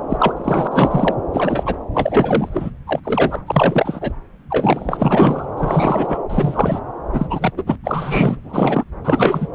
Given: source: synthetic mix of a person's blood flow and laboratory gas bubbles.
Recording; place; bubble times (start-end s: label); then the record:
Doppler ultrasound of blood flow; subclavian vein
0.09-0.33 s: bubbles
0.36-0.67 s: bubbles
0.70-1.15 s: bubbles
1.33-1.77 s: bubbles
1.94-2.71 s: bubbles
2.87-3.00 s: bubbles
3.04-3.42 s: bubbles
3.46-4.13 s: bubbles
4.50-5.45 s: bubbles
5.57-6.23 s: bubbles
6.29-6.80 s: bubbles
7.12-7.53 s: bubbles
7.57-7.62 s: bubbles
7.66-7.76 s: bubbles
7.84-8.37 s: bubbles
8.44-8.84 s: bubbles
9.04-9.47 s: bubbles
From the record:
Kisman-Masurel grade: 343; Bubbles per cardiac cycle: rolling drumbeat, 9 or more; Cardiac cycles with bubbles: 100%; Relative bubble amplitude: loud (0.450 to 0.775); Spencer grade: 3 (all of the cardiac periods contain showers or single bubble signals, but not dominating or overriding the cardiac motion signals); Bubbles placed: anywhere in the cardiac cycle